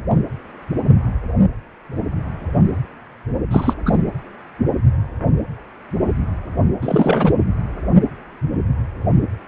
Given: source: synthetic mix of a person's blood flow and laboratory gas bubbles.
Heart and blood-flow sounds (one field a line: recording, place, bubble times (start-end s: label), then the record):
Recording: Doppler ultrasound of blood flow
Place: precordium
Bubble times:
3.50-3.74 s: bubbles
3.85-3.99 s: bubbles
6.82-7.33 s: bubbles
From the record:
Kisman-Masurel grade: 213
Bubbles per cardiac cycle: several, 3 to 8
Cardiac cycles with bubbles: 1 to 10%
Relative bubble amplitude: loud (0.450 to 0.775)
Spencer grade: 1 (occasional bubble signal discernible with the cardiac motion signal, with majority of cardiac periods free of bubbles)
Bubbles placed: anywhere in the cardiac cycle